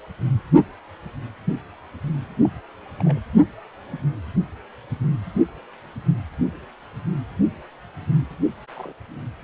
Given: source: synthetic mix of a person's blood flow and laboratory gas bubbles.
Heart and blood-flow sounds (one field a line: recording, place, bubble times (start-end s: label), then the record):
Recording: Doppler ultrasound of blood flow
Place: precordium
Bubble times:
2.43-2.50 s: bubbles
3.00-3.19 s: bubbles
8.76-8.93 s: bubbles
From the record:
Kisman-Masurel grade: 121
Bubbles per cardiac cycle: 1 to 2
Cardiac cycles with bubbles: 10 to 50%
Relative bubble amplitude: barely perceptible (0.100 to 0.250)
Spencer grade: 2 (many but less than half of the cardiac periods contain bubble signals, singularly or in groups)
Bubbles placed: only in the low amplitude regions of the cardiac cycle